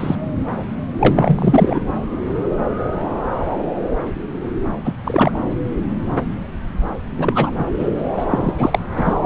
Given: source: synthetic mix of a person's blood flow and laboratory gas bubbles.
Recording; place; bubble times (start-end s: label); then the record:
Doppler ultrasound of blood flow; subclavian vein
0.00-0.16 s: bubbles
1.00-1.80 s: bubbles
4.84-4.94 s: bubbles
5.04-5.38 s: bubbles
7.17-7.50 s: bubbles
7.58-7.66 s: bubbles
7.78-7.90 s: bubbles
8.16-8.25 s: bubbles
8.28-8.52 s: bubbles
8.58-8.79 s: bubbles
8.96-9.15 s: bubbles
From the record:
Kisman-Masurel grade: 233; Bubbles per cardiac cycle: several, 3 to 8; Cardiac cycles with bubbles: 50 to 99%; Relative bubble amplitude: loud (0.450 to 0.775); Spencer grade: 3 (all of the cardiac periods contain showers or single bubble signals, but not dominating or overriding the cardiac motion signals); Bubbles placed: anywhere in the cardiac cycle